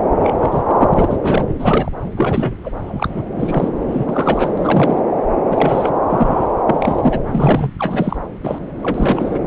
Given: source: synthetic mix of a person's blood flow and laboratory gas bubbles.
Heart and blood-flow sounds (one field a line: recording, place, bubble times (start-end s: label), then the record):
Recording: Doppler ultrasound of blood flow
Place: subclavian vein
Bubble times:
0.21-0.36 s: bubbles
0.41-0.62 s: bubbles
0.68-0.77 s: bubbles
0.80-1.17 s: bubbles
1.21-1.47 s: bubbles
1.58-1.92 s: bubbles
2.16-2.55 s: bubbles
2.64-2.70 s: bubbles
2.87-3.23 s: bubbles
3.35-3.69 s: bubbles
3.88-4.52 s: bubbles
4.57-5.01 s: bubbles
5.51-5.95 s: bubbles
6.09-6.49 s: bubbles
6.67-7.20 s: bubbles
7.29-7.70 s: bubbles
7.79-8.16 s: bubbles
8.43-8.58 s: bubbles
8.82-9.40 s: bubbles
From the record:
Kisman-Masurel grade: 243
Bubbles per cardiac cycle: several, 3 to 8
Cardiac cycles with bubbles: 100%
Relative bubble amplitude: loud (0.450 to 0.775)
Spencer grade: 3 (all of the cardiac periods contain showers or single bubble signals, but not dominating or overriding the cardiac motion signals)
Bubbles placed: anywhere in the cardiac cycle